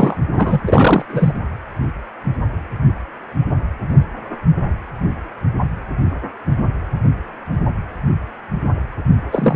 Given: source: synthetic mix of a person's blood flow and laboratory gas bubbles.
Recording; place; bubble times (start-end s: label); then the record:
Doppler ultrasound of blood flow; precordium
0.00-0.17 s: bubbles
0.33-0.64 s: bubbles
0.66-1.06 s: bubbles
1.08-1.33 s: bubbles
9.31-9.56 s: bubbles
From the record:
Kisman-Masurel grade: 223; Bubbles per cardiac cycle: several, 3 to 8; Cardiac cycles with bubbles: 10 to 50%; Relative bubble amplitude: loud (0.450 to 0.775); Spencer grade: 2 (many but less than half of the cardiac periods contain bubble signals, singularly or in groups); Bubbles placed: anywhere in the cardiac cycle